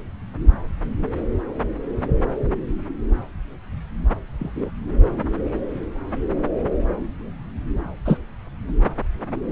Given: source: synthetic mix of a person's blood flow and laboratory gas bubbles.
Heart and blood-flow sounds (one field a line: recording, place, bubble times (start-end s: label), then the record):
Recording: Doppler ultrasound of blood flow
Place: subclavian vein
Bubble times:
4.38-4.70 s: bubbles
8.05-8.19 s: bubbles
From the record:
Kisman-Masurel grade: 123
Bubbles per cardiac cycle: 1 to 2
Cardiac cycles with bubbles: 10 to 50%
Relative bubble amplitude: loud (0.450 to 0.775)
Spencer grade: 2 (many but less than half of the cardiac periods contain bubble signals, singularly or in groups)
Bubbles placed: anywhere in the cardiac cycle